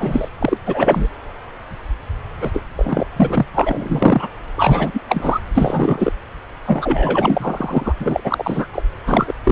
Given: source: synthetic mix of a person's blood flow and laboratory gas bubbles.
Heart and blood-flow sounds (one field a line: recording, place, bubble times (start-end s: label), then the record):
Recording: Doppler ultrasound of blood flow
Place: subclavian vein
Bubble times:
0.00-0.28 s: bubbles
0.39-0.57 s: bubbles
0.65-1.09 s: bubbles
2.40-2.51 s: bubbles
2.53-2.63 s: bubbles
2.76-3.05 s: bubbles
3.16-3.45 s: bubbles
3.53-4.28 s: bubbles
4.57-5.01 s: bubbles
5.09-5.40 s: bubbles
5.54-6.12 s: bubbles
6.67-7.93 s: bubbles
8.00-8.21 s: bubbles
8.24-8.67 s: bubbles
8.72-8.84 s: bubbles
9.06-9.33 s: bubbles
9.44-9.52 s: bubbles
From the record:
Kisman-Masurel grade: 333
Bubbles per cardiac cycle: rolling drumbeat, 9 or more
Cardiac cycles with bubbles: 50 to 99%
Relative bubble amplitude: loud (0.450 to 0.775)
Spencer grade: 3 (all of the cardiac periods contain showers or single bubble signals, but not dominating or overriding the cardiac motion signals)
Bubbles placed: anywhere in the cardiac cycle